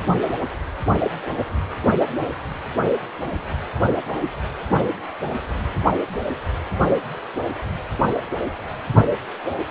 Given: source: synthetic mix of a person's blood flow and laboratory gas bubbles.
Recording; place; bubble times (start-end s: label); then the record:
Doppler ultrasound of blood flow; precordium
4.04-4.31 s: bubbles
From the record:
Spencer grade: 1 (occasional bubble signal discernible with the cardiac motion signal, with majority of cardiac periods free of bubbles); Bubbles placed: only in the low amplitude regions of the cardiac cycle